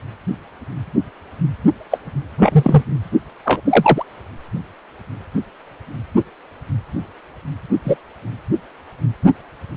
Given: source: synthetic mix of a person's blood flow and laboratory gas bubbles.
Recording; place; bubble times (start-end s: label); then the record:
Doppler ultrasound of blood flow; precordium
1.91-1.99 s: bubbles
2.38-2.82 s: bubbles
3.45-3.61 s: bubbles
3.64-4.03 s: bubbles
7.85-7.96 s: bubbles
From the record:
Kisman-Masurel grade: 123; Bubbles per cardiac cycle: 1 to 2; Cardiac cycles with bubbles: 10 to 50%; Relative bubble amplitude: loud (0.450 to 0.775); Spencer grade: 2 (many but less than half of the cardiac periods contain bubble signals, singularly or in groups); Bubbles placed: anywhere in the cardiac cycle